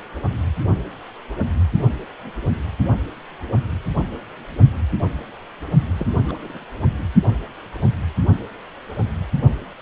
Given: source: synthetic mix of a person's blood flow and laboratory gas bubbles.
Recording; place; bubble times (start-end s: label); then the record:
Doppler ultrasound of blood flow; precordium
5.97-6.07 s: bubbles
6.27-6.65 s: bubbles
6.96-7.02 s: bubbles
From the record:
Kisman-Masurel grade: 211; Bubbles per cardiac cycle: several, 3 to 8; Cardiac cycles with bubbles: 1 to 10%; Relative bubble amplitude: barely perceptible (0.100 to 0.250); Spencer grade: 1 (occasional bubble signal discernible with the cardiac motion signal, with majority of cardiac periods free of bubbles); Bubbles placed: only in the low amplitude regions of the cardiac cycle